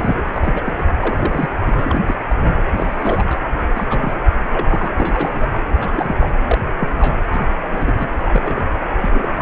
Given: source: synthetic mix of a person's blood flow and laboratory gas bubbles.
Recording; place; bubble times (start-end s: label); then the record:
Doppler ultrasound of blood flow; precordium
0.00-0.21 s: bubbles
0.32-0.61 s: bubbles
0.64-0.83 s: bubbles
1.00-1.48 s: bubbles
1.66-2.04 s: bubbles
2.07-2.14 s: bubbles
2.29-2.36 s: bubbles
2.39-2.54 s: bubbles
2.69-3.40 s: bubbles
3.75-4.13 s: bubbles
4.53-4.92 s: bubbles
4.96-5.65 s: bubbles
5.80-6.16 s: bubbles
6.20-6.29 s: bubbles
6.46-6.58 s: bubbles
6.78-7.17 s: bubbles
7.28-7.47 s: bubbles
7.71-8.09 s: bubbles
8.25-8.65 s: bubbles
9.00-9.32 s: bubbles
9.38-9.42 s: bubbles
From the record:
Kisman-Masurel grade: 242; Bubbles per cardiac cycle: several, 3 to 8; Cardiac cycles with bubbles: 100%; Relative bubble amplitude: moderate (0.250 to 0.450); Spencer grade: 3 (all of the cardiac periods contain showers or single bubble signals, but not dominating or overriding the cardiac motion signals); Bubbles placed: anywhere in the cardiac cycle